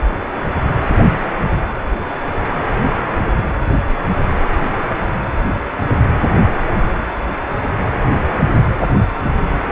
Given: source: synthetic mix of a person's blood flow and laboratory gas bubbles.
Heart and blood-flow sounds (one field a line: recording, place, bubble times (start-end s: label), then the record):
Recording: Doppler ultrasound of blood flow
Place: precordium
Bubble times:
no bubbles
From the record:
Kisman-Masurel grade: 000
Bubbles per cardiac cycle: 0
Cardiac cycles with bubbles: 0%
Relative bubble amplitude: no bubbles discernible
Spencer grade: 0 (complete lack of bubble signals)